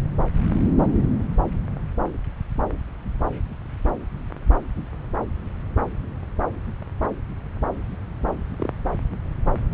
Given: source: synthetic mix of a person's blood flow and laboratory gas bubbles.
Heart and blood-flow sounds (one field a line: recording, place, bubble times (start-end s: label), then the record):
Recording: Doppler ultrasound of blood flow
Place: subclavian vein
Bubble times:
8.58-8.70 s: bubbles
From the record:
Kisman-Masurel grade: 112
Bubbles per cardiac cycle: 1 to 2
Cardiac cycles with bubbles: 1 to 10%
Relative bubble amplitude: moderate (0.250 to 0.450)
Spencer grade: 1 (occasional bubble signal discernible with the cardiac motion signal, with majority of cardiac periods free of bubbles)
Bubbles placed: anywhere in the cardiac cycle